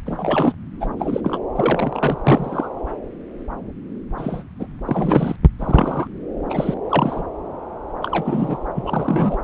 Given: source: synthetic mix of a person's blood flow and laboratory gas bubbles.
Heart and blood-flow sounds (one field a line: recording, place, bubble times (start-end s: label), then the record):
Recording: Doppler ultrasound of blood flow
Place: subclavian vein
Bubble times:
0.06-0.53 s: bubbles
0.80-0.87 s: bubbles
0.99-1.21 s: bubbles
1.23-1.40 s: bubbles
1.55-2.16 s: bubbles
2.25-2.68 s: bubbles
4.17-4.43 s: bubbles
4.59-4.67 s: bubbles
4.85-5.36 s: bubbles
5.59-6.08 s: bubbles
6.50-6.74 s: bubbles
6.89-7.23 s: bubbles
8.02-8.67 s: bubbles
8.76-9.38 s: bubbles
From the record:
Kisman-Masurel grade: 232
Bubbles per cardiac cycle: several, 3 to 8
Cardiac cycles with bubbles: 50 to 99%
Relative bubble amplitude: moderate (0.250 to 0.450)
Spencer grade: 3 (all of the cardiac periods contain showers or single bubble signals, but not dominating or overriding the cardiac motion signals)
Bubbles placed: anywhere in the cardiac cycle